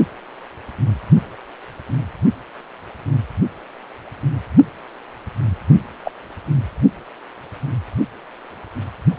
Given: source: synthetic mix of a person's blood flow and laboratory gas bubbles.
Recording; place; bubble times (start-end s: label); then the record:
Doppler ultrasound of blood flow; precordium
6.04-6.11 s: bubbles
From the record:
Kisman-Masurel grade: 112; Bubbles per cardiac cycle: 1 to 2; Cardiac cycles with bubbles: 1 to 10%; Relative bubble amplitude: moderate (0.250 to 0.450); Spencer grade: 1 (occasional bubble signal discernible with the cardiac motion signal, with majority of cardiac periods free of bubbles); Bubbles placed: only in the low amplitude regions of the cardiac cycle